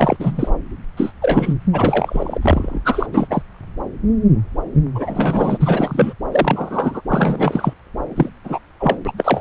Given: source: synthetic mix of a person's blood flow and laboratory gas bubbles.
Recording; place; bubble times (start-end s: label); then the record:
Doppler ultrasound of blood flow; subclavian vein
0.00-0.51 s: bubbles
0.97-1.12 s: bubbles
1.22-1.54 s: bubbles
1.73-2.39 s: bubbles
2.42-2.79 s: bubbles
2.84-3.08 s: bubbles
3.12-3.27 s: bubbles
3.30-3.42 s: bubbles
4.95-5.58 s: bubbles
5.61-6.13 s: bubbles
6.32-7.01 s: bubbles
7.09-7.74 s: bubbles
8.16-8.29 s: bubbles
8.44-8.59 s: bubbles
8.79-8.96 s: bubbles
9.05-9.12 s: bubbles
9.17-9.41 s: bubbles
From the record:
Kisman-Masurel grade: 233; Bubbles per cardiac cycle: several, 3 to 8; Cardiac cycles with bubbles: 50 to 99%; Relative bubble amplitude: loud (0.450 to 0.775); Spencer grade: 3 (all of the cardiac periods contain showers or single bubble signals, but not dominating or overriding the cardiac motion signals); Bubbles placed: anywhere in the cardiac cycle